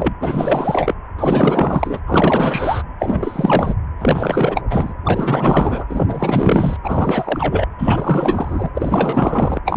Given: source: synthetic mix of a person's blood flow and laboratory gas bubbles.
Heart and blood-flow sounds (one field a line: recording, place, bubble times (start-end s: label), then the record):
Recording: Doppler ultrasound of blood flow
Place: precordium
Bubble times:
0.00-0.14 s: bubbles
0.20-0.95 s: bubbles
1.18-2.00 s: bubbles
2.06-2.83 s: bubbles
2.99-3.74 s: bubbles
3.99-4.62 s: bubbles
4.70-4.94 s: bubbles
5.04-5.85 s: bubbles
5.89-6.76 s: bubbles
6.83-7.67 s: bubbles
7.78-8.69 s: bubbles
8.74-9.59 s: bubbles
9.65-9.77 s: bubbles
From the record:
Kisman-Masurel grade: 444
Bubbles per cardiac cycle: continuous sound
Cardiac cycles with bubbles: 100%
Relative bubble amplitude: maximal (0.775 to 0.999)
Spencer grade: 4 (maximum detectable bubble signal sounding continuously throughout systole and diastole of every cardiac period, and overriding the amplitude of the normal cardiac signals)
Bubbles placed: anywhere in the cardiac cycle